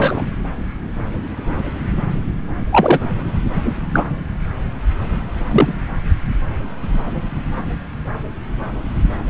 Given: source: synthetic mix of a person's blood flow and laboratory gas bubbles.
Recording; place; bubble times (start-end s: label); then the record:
Doppler ultrasound of blood flow; subclavian vein
0.00-0.22 s: bubbles
2.71-2.98 s: bubbles
3.64-3.71 s: bubbles
3.92-4.04 s: bubbles
5.50-5.75 s: bubbles
From the record:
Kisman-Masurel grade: 123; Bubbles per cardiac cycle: 1 to 2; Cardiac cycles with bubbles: 10 to 50%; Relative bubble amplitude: loud (0.450 to 0.775); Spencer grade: 2 (many but less than half of the cardiac periods contain bubble signals, singularly or in groups); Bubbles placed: anywhere in the cardiac cycle